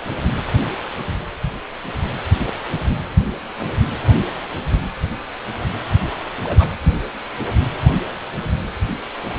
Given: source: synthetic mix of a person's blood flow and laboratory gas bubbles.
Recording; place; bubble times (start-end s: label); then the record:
Doppler ultrasound of blood flow; precordium
6.44-6.71 s: bubbles
From the record:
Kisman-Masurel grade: 211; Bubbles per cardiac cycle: several, 3 to 8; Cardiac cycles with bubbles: 1 to 10%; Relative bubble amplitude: barely perceptible (0.100 to 0.250); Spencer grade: 1 (occasional bubble signal discernible with the cardiac motion signal, with majority of cardiac periods free of bubbles); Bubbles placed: anywhere in the cardiac cycle